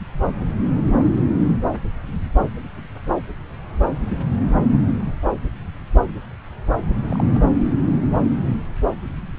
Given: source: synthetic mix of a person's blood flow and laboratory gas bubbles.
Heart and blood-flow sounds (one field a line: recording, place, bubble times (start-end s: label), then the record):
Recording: Doppler ultrasound of blood flow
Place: subclavian vein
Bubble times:
7.09-7.25 s: bubbles
7.33-7.40 s: bubbles
From the record:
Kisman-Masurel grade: 111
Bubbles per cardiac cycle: 1 to 2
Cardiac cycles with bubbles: 1 to 10%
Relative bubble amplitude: barely perceptible (0.100 to 0.250)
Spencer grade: 1 (occasional bubble signal discernible with the cardiac motion signal, with majority of cardiac periods free of bubbles)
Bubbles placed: anywhere in the cardiac cycle